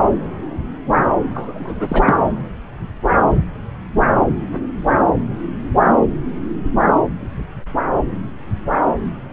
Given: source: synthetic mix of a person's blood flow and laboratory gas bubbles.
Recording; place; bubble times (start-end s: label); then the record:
Doppler ultrasound of blood flow; subclavian vein
1.34-2.16 s: bubbles
From the record:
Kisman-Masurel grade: 222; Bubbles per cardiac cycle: several, 3 to 8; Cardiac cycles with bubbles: 10 to 50%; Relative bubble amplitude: moderate (0.250 to 0.450); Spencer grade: 2 (many but less than half of the cardiac periods contain bubble signals, singularly or in groups); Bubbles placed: anywhere in the cardiac cycle